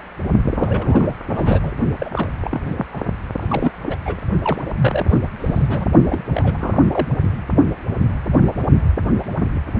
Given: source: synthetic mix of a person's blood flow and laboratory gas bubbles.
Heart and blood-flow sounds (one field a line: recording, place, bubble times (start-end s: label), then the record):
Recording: Doppler ultrasound of blood flow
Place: precordium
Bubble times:
0.46-1.14 s: bubbles
1.32-1.71 s: bubbles
2.00-2.10 s: bubbles
2.16-2.31 s: bubbles
2.44-2.86 s: bubbles
2.93-3.01 s: bubbles
3.42-3.72 s: bubbles
3.85-3.96 s: bubbles
4.05-4.18 s: bubbles
4.42-4.70 s: bubbles
4.75-5.06 s: bubbles
5.09-5.17 s: bubbles
5.39-5.87 s: bubbles
6.05-6.22 s: bubbles
6.34-6.58 s: bubbles
6.60-7.07 s: bubbles
From the record:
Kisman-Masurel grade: 332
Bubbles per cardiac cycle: rolling drumbeat, 9 or more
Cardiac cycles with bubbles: 50 to 99%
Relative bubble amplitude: moderate (0.250 to 0.450)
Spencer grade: 3 (all of the cardiac periods contain showers or single bubble signals, but not dominating or overriding the cardiac motion signals)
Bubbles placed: only in the low amplitude regions of the cardiac cycle